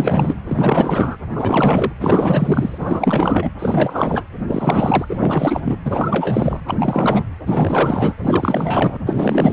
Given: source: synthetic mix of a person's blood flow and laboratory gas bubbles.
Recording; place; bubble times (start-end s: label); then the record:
Doppler ultrasound of blood flow; precordium
0.00-0.35 s: bubbles
0.46-1.17 s: bubbles
1.33-1.93 s: bubbles
2.00-3.51 s: bubbles
3.58-4.23 s: bubbles
4.47-5.05 s: bubbles
5.09-5.77 s: bubbles
5.85-6.60 s: bubbles
6.66-7.24 s: bubbles
7.46-8.16 s: bubbles
8.20-8.98 s: bubbles
9.06-9.52 s: bubbles
From the record:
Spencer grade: 4 (maximum detectable bubble signal sounding continuously throughout systole and diastole of every cardiac period, and overriding the amplitude of the normal cardiac signals); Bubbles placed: anywhere in the cardiac cycle